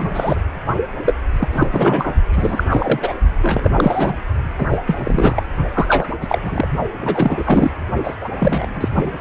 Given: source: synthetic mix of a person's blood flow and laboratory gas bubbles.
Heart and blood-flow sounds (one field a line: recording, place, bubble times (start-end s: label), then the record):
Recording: Doppler ultrasound of blood flow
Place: precordium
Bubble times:
0.00-0.41 s: bubbles
1.05-1.14 s: bubbles
1.39-1.48 s: bubbles
1.52-1.67 s: bubbles
1.72-2.15 s: bubbles
2.32-2.63 s: bubbles
2.69-3.13 s: bubbles
3.43-3.74 s: bubbles
3.76-4.14 s: bubbles
4.58-4.66 s: bubbles
4.70-4.78 s: bubbles
4.87-5.43 s: bubbles
5.74-6.07 s: bubbles
6.20-6.39 s: bubbles
6.42-6.67 s: bubbles
6.99-7.71 s: bubbles
8.03-8.16 s: bubbles
8.21-8.29 s: bubbles
8.39-8.88 s: bubbles
8.93-9.12 s: bubbles
9.17-9.21 s: bubbles
From the record:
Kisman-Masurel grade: 343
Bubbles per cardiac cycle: rolling drumbeat, 9 or more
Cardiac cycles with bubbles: 100%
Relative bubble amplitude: loud (0.450 to 0.775)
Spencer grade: 3 (all of the cardiac periods contain showers or single bubble signals, but not dominating or overriding the cardiac motion signals)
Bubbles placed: only in the low amplitude regions of the cardiac cycle